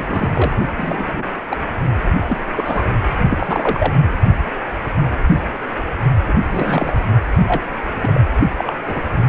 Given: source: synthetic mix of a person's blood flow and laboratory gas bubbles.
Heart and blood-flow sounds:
Doppler ultrasound of blood flow; precordium
0.00-0.29 s: bubbles
0.35-0.51 s: bubbles
0.77-1.23 s: bubbles
1.49-1.56 s: bubbles
2.27-2.38 s: bubbles
2.56-2.84 s: bubbles
3.29-3.93 s: bubbles
6.28-6.33 s: bubbles
6.49-6.97 s: bubbles
7.47-7.62 s: bubbles
8.01-8.21 s: bubbles
8.58-8.65 s: bubbles
8.67-8.73 s: bubbles
8.87-9.01 s: bubbles
From the record:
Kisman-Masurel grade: 232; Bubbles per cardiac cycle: several, 3 to 8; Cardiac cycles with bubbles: 50 to 99%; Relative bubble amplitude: moderate (0.250 to 0.450); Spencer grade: 3 (all of the cardiac periods contain showers or single bubble signals, but not dominating or overriding the cardiac motion signals); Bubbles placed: only in the low amplitude regions of the cardiac cycle

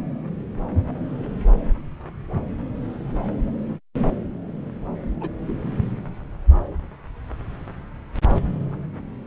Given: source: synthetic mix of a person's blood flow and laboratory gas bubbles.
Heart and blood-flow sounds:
Doppler ultrasound of blood flow; subclavian vein
5.21-5.29 s: bubbles
5.47-5.53 s: bubbles
From the record:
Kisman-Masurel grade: 111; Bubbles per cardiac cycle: 1 to 2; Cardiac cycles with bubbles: 1 to 10%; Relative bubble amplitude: barely perceptible (0.100 to 0.250); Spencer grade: 1 (occasional bubble signal discernible with the cardiac motion signal, with majority of cardiac periods free of bubbles); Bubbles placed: anywhere in the cardiac cycle

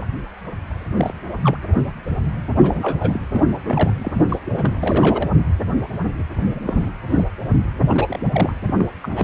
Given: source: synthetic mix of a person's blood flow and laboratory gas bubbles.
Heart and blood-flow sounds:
Doppler ultrasound of blood flow; precordium
0.92-1.14 s: bubbles
1.43-1.58 s: bubbles
2.58-3.20 s: bubbles
3.30-3.45 s: bubbles
3.50-3.90 s: bubbles
4.01-4.40 s: bubbles
4.45-5.29 s: bubbles
6.54-6.61 s: bubbles
6.67-6.90 s: bubbles
7.09-7.24 s: bubbles
7.90-8.20 s: bubbles
8.32-8.54 s: bubbles
8.63-8.86 s: bubbles
9.02-9.24 s: bubbles
From the record:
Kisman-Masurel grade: 232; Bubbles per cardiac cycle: several, 3 to 8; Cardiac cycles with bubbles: 50 to 99%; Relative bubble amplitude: moderate (0.250 to 0.450); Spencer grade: 3 (all of the cardiac periods contain showers or single bubble signals, but not dominating or overriding the cardiac motion signals); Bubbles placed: anywhere in the cardiac cycle

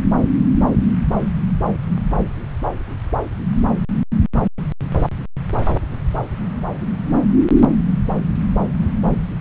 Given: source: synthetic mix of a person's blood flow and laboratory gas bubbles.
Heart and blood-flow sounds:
Doppler ultrasound of blood flow; subclavian vein
5.64-5.75 s: bubbles
6.81-6.87 s: bubbles
From the record:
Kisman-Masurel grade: 111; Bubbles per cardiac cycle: 1 to 2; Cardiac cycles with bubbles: 1 to 10%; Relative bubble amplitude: barely perceptible (0.100 to 0.250); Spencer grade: 1 (occasional bubble signal discernible with the cardiac motion signal, with majority of cardiac periods free of bubbles); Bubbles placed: anywhere in the cardiac cycle

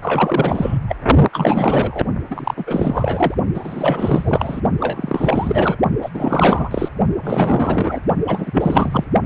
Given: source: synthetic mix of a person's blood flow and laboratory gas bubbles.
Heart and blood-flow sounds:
Doppler ultrasound of blood flow; precordium
0.02-0.77 s: bubbles
0.88-0.96 s: bubbles
1.32-2.06 s: bubbles
2.30-2.54 s: bubbles
2.56-3.35 s: bubbles
3.54-4.61 s: bubbles
4.79-5.76 s: bubbles
6.01-6.10 s: bubbles
6.14-6.88 s: bubbles
7.24-8.01 s: bubbles
8.27-9.04 s: bubbles
From the record:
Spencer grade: 4 (maximum detectable bubble signal sounding continuously throughout systole and diastole of every cardiac period, and overriding the amplitude of the normal cardiac signals); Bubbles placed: only in the low amplitude regions of the cardiac cycle

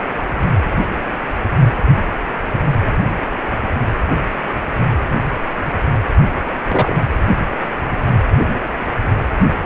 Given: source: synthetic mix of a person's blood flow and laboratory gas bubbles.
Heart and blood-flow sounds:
Doppler ultrasound of blood flow; precordium
6.69-6.95 s: bubbles
From the record:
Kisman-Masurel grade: 113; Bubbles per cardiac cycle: 1 to 2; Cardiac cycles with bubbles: 1 to 10%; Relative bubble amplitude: loud (0.450 to 0.775); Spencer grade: 1 (occasional bubble signal discernible with the cardiac motion signal, with majority of cardiac periods free of bubbles); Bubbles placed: anywhere in the cardiac cycle

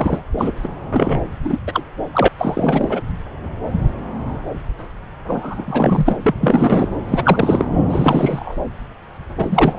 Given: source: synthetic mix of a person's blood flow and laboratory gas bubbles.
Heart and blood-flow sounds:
Doppler ultrasound of blood flow; subclavian vein
0.00-0.23 s: bubbles
0.34-0.51 s: bubbles
0.64-0.68 s: bubbles
0.92-1.20 s: bubbles
1.45-1.59 s: bubbles
1.67-1.83 s: bubbles
2.14-2.28 s: bubbles
2.38-3.01 s: bubbles
5.28-6.16 s: bubbles
6.23-6.34 s: bubbles
6.40-6.90 s: bubbles
7.08-7.66 s: bubbles
7.90-8.56 s: bubbles
9.37-9.79 s: bubbles
From the record:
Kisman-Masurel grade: 333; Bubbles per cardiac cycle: rolling drumbeat, 9 or more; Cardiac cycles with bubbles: 50 to 99%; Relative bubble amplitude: loud (0.450 to 0.775); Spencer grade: 3 (all of the cardiac periods contain showers or single bubble signals, but not dominating or overriding the cardiac motion signals); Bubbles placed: anywhere in the cardiac cycle

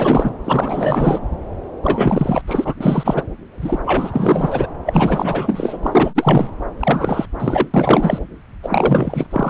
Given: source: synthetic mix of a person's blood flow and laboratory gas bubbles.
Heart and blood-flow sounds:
Doppler ultrasound of blood flow; subclavian vein
0.00-0.34 s: bubbles
0.44-1.20 s: bubbles
1.83-2.42 s: bubbles
2.48-2.75 s: bubbles
2.81-3.24 s: bubbles
3.62-3.79 s: bubbles
3.84-4.67 s: bubbles
4.86-5.77 s: bubbles
5.83-6.50 s: bubbles
6.79-7.26 s: bubbles
7.38-7.67 s: bubbles
7.74-8.19 s: bubbles
8.62-9.27 s: bubbles
9.30-9.50 s: bubbles
From the record:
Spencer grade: 4 (maximum detectable bubble signal sounding continuously throughout systole and diastole of every cardiac period, and overriding the amplitude of the normal cardiac signals); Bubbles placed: anywhere in the cardiac cycle

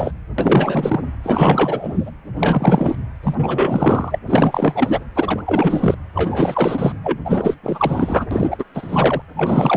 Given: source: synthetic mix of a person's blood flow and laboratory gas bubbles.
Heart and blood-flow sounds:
Doppler ultrasound of blood flow; precordium
0.00-0.12 s: bubbles
0.38-1.00 s: bubbles
1.23-2.12 s: bubbles
2.36-2.96 s: bubbles
3.23-4.19 s: bubbles
4.26-5.04 s: bubbles
5.16-5.42 s: bubbles
5.45-5.95 s: bubbles
6.15-6.92 s: bubbles
7.03-7.18 s: bubbles
7.25-7.55 s: bubbles
7.63-8.27 s: bubbles
8.31-8.63 s: bubbles
8.74-9.22 s: bubbles
9.34-9.77 s: bubbles
From the record:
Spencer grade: 4 (maximum detectable bubble signal sounding continuously throughout systole and diastole of every cardiac period, and overriding the amplitude of the normal cardiac signals); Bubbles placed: anywhere in the cardiac cycle

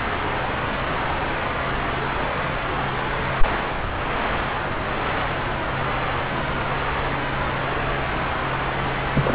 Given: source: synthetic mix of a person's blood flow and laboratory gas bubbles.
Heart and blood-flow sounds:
Doppler ultrasound of blood flow; subclavian vein
9.12-9.35 s: bubbles
From the record:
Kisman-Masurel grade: 111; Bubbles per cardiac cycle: 1 to 2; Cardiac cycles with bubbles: 1 to 10%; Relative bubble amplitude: barely perceptible (0.100 to 0.250); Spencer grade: 1 (occasional bubble signal discernible with the cardiac motion signal, with majority of cardiac periods free of bubbles); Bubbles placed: anywhere in the cardiac cycle

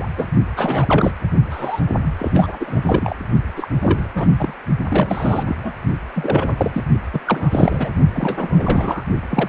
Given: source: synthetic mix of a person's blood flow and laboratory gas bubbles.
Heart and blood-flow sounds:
Doppler ultrasound of blood flow; precordium
0.00-0.11 s: bubbles
0.16-0.26 s: bubbles
0.56-1.12 s: bubbles
1.51-1.81 s: bubbles
2.04-2.15 s: bubbles
2.19-2.31 s: bubbles
2.34-2.57 s: bubbles
2.60-3.16 s: bubbles
3.56-3.68 s: bubbles
3.81-4.11 s: bubbles
4.15-4.28 s: bubbles
4.39-4.54 s: bubbles
4.90-5.77 s: bubbles
6.15-6.82 s: bubbles
7.13-7.20 s: bubbles
7.26-7.89 s: bubbles
8.12-9.04 s: bubbles
9.29-9.49 s: bubbles
From the record:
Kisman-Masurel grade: 343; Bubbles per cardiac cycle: rolling drumbeat, 9 or more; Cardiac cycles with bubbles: 100%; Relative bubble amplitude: loud (0.450 to 0.775); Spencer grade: 3 (all of the cardiac periods contain showers or single bubble signals, but not dominating or overriding the cardiac motion signals); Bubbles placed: only in the low amplitude regions of the cardiac cycle

